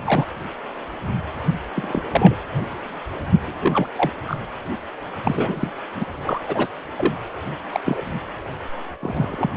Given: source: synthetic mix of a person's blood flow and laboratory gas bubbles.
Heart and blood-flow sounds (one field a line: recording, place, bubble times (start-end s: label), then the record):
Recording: Doppler ultrasound of blood flow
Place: precordium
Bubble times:
0.05-0.25 s: bubbles
1.75-2.02 s: bubbles
2.11-2.43 s: bubbles
3.46-3.87 s: bubbles
3.96-4.11 s: bubbles
4.28-4.37 s: bubbles
5.24-5.68 s: bubbles
5.95-6.05 s: bubbles
6.24-6.40 s: bubbles
6.47-6.69 s: bubbles
6.97-7.13 s: bubbles
7.72-7.80 s: bubbles
7.84-8.02 s: bubbles
9.01-9.50 s: bubbles
From the record:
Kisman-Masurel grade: 232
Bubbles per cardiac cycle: several, 3 to 8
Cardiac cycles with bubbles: 50 to 99%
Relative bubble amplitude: moderate (0.250 to 0.450)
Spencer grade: 3 (all of the cardiac periods contain showers or single bubble signals, but not dominating or overriding the cardiac motion signals)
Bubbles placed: anywhere in the cardiac cycle